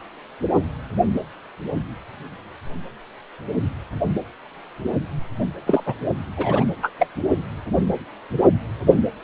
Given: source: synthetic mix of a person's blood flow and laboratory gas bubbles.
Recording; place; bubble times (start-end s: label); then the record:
Doppler ultrasound of blood flow; precordium
5.67-5.83 s: bubbles
5.86-5.94 s: bubbles
6.37-6.65 s: bubbles
6.82-6.92 s: bubbles
6.99-7.07 s: bubbles
From the record:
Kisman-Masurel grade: 212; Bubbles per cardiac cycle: several, 3 to 8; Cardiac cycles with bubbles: 1 to 10%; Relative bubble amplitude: moderate (0.250 to 0.450); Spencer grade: 1 (occasional bubble signal discernible with the cardiac motion signal, with majority of cardiac periods free of bubbles); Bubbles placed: only in the low amplitude regions of the cardiac cycle